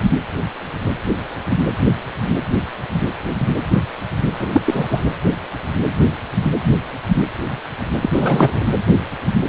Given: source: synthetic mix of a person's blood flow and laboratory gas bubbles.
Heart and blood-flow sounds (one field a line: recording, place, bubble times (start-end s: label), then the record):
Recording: Doppler ultrasound of blood flow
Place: precordium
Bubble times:
4.39-4.47 s: bubbles
4.52-4.61 s: bubbles
4.65-5.01 s: bubbles
8.01-8.10 s: bubbles
8.12-8.66 s: bubbles
From the record:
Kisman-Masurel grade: 213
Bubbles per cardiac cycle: several, 3 to 8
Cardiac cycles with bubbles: 1 to 10%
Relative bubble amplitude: loud (0.450 to 0.775)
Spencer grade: 1 (occasional bubble signal discernible with the cardiac motion signal, with majority of cardiac periods free of bubbles)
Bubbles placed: anywhere in the cardiac cycle